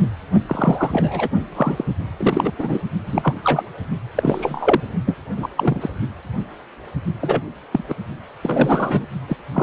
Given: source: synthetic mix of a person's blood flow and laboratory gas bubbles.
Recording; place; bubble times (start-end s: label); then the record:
Doppler ultrasound of blood flow; precordium
0.46-1.28 s: bubbles
1.55-1.84 s: bubbles
2.17-2.51 s: bubbles
2.58-2.81 s: bubbles
3.06-3.34 s: bubbles
3.44-3.63 s: bubbles
4.16-4.80 s: bubbles
5.06-5.16 s: bubbles
5.37-5.49 s: bubbles
5.57-5.91 s: bubbles
7.21-7.42 s: bubbles
7.71-7.83 s: bubbles
7.88-7.94 s: bubbles
8.43-9.06 s: bubbles
9.28-9.37 s: bubbles
9.54-9.63 s: bubbles
From the record:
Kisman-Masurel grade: 232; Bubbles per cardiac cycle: several, 3 to 8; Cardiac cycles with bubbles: 50 to 99%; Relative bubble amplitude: moderate (0.250 to 0.450); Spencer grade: 3 (all of the cardiac periods contain showers or single bubble signals, but not dominating or overriding the cardiac motion signals); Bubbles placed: only in the low amplitude regions of the cardiac cycle